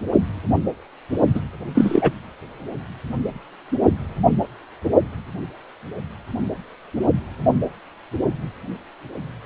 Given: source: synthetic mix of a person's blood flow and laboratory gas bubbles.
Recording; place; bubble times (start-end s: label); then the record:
Doppler ultrasound of blood flow; precordium
1.34-1.41 s: bubbles
1.74-2.12 s: bubbles
From the record:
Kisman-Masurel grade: 213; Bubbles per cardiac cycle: several, 3 to 8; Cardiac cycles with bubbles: 1 to 10%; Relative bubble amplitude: loud (0.450 to 0.775); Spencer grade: 1 (occasional bubble signal discernible with the cardiac motion signal, with majority of cardiac periods free of bubbles); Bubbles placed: only in the low amplitude regions of the cardiac cycle